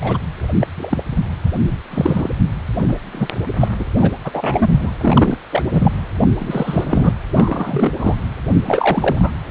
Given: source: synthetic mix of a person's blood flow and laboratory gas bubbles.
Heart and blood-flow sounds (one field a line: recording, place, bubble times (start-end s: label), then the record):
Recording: Doppler ultrasound of blood flow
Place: precordium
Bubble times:
0.01-0.17 s: bubbles
0.60-0.67 s: bubbles
0.78-1.03 s: bubbles
1.71-1.79 s: bubbles
1.90-2.28 s: bubbles
2.77-2.98 s: bubbles
3.11-3.27 s: bubbles
3.59-3.69 s: bubbles
3.79-3.85 s: bubbles
3.99-4.12 s: bubbles
4.25-4.31 s: bubbles
4.33-4.91 s: bubbles
4.98-5.39 s: bubbles
5.49-5.92 s: bubbles
6.21-6.27 s: bubbles
6.39-7.14 s: bubbles
7.30-7.91 s: bubbles
7.99-8.15 s: bubbles
8.66-9.31 s: bubbles
From the record:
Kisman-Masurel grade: 243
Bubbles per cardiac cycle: several, 3 to 8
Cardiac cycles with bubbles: 100%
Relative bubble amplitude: loud (0.450 to 0.775)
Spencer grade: 3 (all of the cardiac periods contain showers or single bubble signals, but not dominating or overriding the cardiac motion signals)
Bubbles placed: anywhere in the cardiac cycle